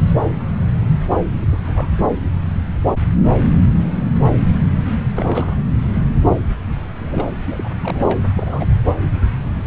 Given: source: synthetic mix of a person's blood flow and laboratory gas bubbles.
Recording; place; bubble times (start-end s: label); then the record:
Doppler ultrasound of blood flow; subclavian vein
1.41-1.89 s: bubbles
5.14-5.55 s: bubbles
6.98-7.26 s: bubbles
7.44-7.69 s: bubbles
7.79-8.19 s: bubbles
8.34-8.75 s: bubbles
From the record:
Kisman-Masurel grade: 221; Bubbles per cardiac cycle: several, 3 to 8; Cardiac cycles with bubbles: 10 to 50%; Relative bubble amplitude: barely perceptible (0.100 to 0.250); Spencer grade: 2 (many but less than half of the cardiac periods contain bubble signals, singularly or in groups); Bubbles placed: anywhere in the cardiac cycle